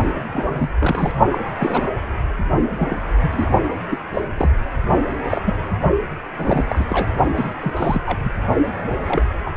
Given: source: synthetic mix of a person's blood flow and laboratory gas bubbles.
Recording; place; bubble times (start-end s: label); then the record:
Doppler ultrasound of blood flow; precordium
0.31-0.70 s: bubbles
0.79-1.13 s: bubbles
1.31-1.38 s: bubbles
1.56-1.92 s: bubbles
2.71-3.11 s: bubbles
3.21-3.50 s: bubbles
3.89-3.98 s: bubbles
4.14-4.22 s: bubbles
4.37-4.48 s: bubbles
5.29-5.42 s: bubbles
5.46-5.54 s: bubbles
6.37-6.66 s: bubbles
6.70-6.85 s: bubbles
6.90-7.12 s: bubbles
7.35-7.54 s: bubbles
7.61-8.01 s: bubbles
8.06-8.18 s: bubbles
8.24-8.29 s: bubbles
9.07-9.24 s: bubbles
9.46-9.51 s: bubbles
From the record:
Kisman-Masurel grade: 242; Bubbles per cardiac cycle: several, 3 to 8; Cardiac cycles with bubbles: 100%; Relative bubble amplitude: moderate (0.250 to 0.450); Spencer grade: 3 (all of the cardiac periods contain showers or single bubble signals, but not dominating or overriding the cardiac motion signals); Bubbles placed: only in the low amplitude regions of the cardiac cycle